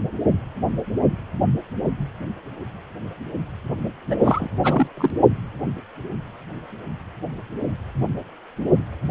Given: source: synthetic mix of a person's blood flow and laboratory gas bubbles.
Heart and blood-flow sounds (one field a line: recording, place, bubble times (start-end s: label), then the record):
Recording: Doppler ultrasound of blood flow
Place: precordium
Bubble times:
4.07-4.16 s: bubbles
4.20-4.48 s: bubbles
4.63-4.87 s: bubbles
4.97-5.10 s: bubbles
From the record:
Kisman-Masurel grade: 212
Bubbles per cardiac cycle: several, 3 to 8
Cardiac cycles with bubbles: 1 to 10%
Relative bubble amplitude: moderate (0.250 to 0.450)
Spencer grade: 1 (occasional bubble signal discernible with the cardiac motion signal, with majority of cardiac periods free of bubbles)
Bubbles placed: only in the low amplitude regions of the cardiac cycle